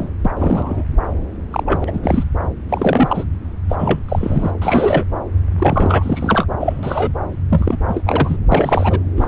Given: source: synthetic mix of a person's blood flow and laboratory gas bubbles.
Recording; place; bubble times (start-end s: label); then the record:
Doppler ultrasound of blood flow; subclavian vein
0.00-0.10 s: bubbles
0.24-0.30 s: bubbles
0.36-0.84 s: bubbles
1.52-2.01 s: bubbles
2.03-2.24 s: bubbles
2.69-3.25 s: bubbles
3.69-3.75 s: bubbles
3.78-3.99 s: bubbles
4.08-4.51 s: bubbles
4.62-5.05 s: bubbles
5.58-6.46 s: bubbles
6.60-7.12 s: bubbles
7.50-7.77 s: bubbles
7.88-8.04 s: bubbles
8.06-8.38 s: bubbles
8.52-8.99 s: bubbles
9.16-9.28 s: bubbles
From the record:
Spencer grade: 3 (all of the cardiac periods contain showers or single bubble signals, but not dominating or overriding the cardiac motion signals); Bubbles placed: anywhere in the cardiac cycle